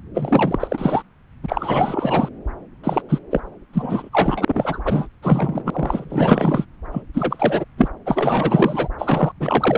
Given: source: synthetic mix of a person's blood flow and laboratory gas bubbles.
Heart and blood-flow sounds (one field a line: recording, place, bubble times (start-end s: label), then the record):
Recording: Doppler ultrasound of blood flow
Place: subclavian vein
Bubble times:
0.14-1.02 s: bubbles
1.43-2.29 s: bubbles
2.84-3.02 s: bubbles
3.09-3.19 s: bubbles
3.31-3.40 s: bubbles
3.73-4.09 s: bubbles
4.12-4.82 s: bubbles
4.84-5.08 s: bubbles
5.22-6.65 s: bubbles
6.92-7.02 s: bubbles
7.13-7.65 s: bubbles
7.77-7.88 s: bubbles
8.06-8.88 s: bubbles
8.98-9.32 s: bubbles
9.40-9.77 s: bubbles
From the record:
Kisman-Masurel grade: 444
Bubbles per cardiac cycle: continuous sound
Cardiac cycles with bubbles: 100%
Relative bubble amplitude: maximal (0.775 to 0.999)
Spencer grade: 4 (maximum detectable bubble signal sounding continuously throughout systole and diastole of every cardiac period, and overriding the amplitude of the normal cardiac signals)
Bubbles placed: anywhere in the cardiac cycle